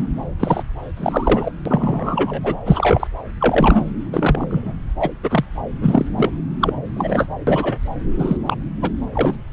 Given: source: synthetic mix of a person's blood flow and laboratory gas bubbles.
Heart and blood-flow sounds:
Doppler ultrasound of blood flow; subclavian vein
0.00-0.03 s: bubbles
0.40-0.63 s: bubbles
0.96-1.52 s: bubbles
1.65-2.58 s: bubbles
2.65-3.07 s: bubbles
3.40-3.86 s: bubbles
4.12-4.74 s: bubbles
5.00-5.10 s: bubbles
5.23-5.45 s: bubbles
5.82-6.05 s: bubbles
6.17-6.30 s: bubbles
6.61-6.74 s: bubbles
6.86-7.26 s: bubbles
7.47-7.80 s: bubbles
8.18-8.37 s: bubbles
8.46-8.55 s: bubbles
8.81-8.91 s: bubbles
9.13-9.36 s: bubbles
From the record:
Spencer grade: 3 (all of the cardiac periods contain showers or single bubble signals, but not dominating or overriding the cardiac motion signals); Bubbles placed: anywhere in the cardiac cycle

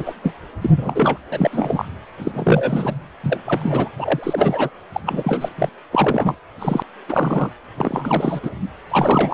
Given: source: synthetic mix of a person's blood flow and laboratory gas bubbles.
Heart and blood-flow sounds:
Doppler ultrasound of blood flow; precordium
0.00-0.15 s: bubbles
0.23-0.33 s: bubbles
0.61-1.18 s: bubbles
1.30-1.85 s: bubbles
2.18-2.94 s: bubbles
3.24-3.42 s: bubbles
3.45-3.88 s: bubbles
3.98-4.70 s: bubbles
4.94-5.00 s: bubbles
5.06-5.49 s: bubbles
5.58-5.69 s: bubbles
5.91-6.34 s: bubbles
6.58-6.83 s: bubbles
7.08-7.50 s: bubbles
7.76-8.40 s: bubbles
8.42-8.50 s: bubbles
8.91-9.34 s: bubbles
From the record:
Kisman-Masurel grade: 343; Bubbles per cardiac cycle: rolling drumbeat, 9 or more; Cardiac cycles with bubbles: 100%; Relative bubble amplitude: loud (0.450 to 0.775); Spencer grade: 3 (all of the cardiac periods contain showers or single bubble signals, but not dominating or overriding the cardiac motion signals); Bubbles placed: anywhere in the cardiac cycle

